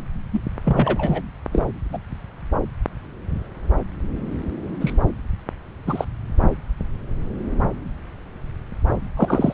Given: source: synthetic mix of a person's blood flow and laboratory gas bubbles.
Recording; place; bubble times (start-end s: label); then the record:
Doppler ultrasound of blood flow; subclavian vein
0.33-0.41 s: bubbles
0.64-1.23 s: bubbles
1.52-1.68 s: bubbles
1.92-1.98 s: bubbles
4.80-4.93 s: bubbles
5.86-6.04 s: bubbles
9.16-9.54 s: bubbles
From the record:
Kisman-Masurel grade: 222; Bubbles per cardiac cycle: several, 3 to 8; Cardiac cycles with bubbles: 10 to 50%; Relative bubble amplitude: moderate (0.250 to 0.450); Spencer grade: 2 (many but less than half of the cardiac periods contain bubble signals, singularly or in groups); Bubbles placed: anywhere in the cardiac cycle